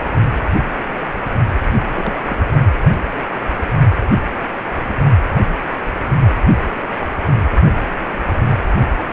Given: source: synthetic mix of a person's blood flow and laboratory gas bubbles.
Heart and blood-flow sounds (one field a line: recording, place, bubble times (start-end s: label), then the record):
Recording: Doppler ultrasound of blood flow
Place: precordium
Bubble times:
1.89-1.93 s: bubbles
1.96-2.22 s: bubbles
2.25-2.37 s: bubbles
From the record:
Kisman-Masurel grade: 211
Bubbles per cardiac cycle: several, 3 to 8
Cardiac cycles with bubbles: 1 to 10%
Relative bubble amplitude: barely perceptible (0.100 to 0.250)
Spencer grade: 1 (occasional bubble signal discernible with the cardiac motion signal, with majority of cardiac periods free of bubbles)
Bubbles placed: only in the low amplitude regions of the cardiac cycle